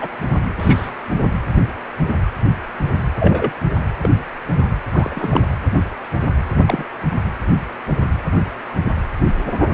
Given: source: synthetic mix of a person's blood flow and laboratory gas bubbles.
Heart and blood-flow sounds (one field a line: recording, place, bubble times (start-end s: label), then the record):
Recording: Doppler ultrasound of blood flow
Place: precordium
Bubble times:
0.01-0.08 s: bubbles
0.58-0.90 s: bubbles
3.19-3.52 s: bubbles
4.00-4.09 s: bubbles
4.57-4.67 s: bubbles
4.92-5.41 s: bubbles
6.66-6.84 s: bubbles
From the record:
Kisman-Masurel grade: 122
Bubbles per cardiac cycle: 1 to 2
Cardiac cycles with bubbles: 10 to 50%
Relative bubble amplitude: moderate (0.250 to 0.450)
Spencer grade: 2 (many but less than half of the cardiac periods contain bubble signals, singularly or in groups)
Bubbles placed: anywhere in the cardiac cycle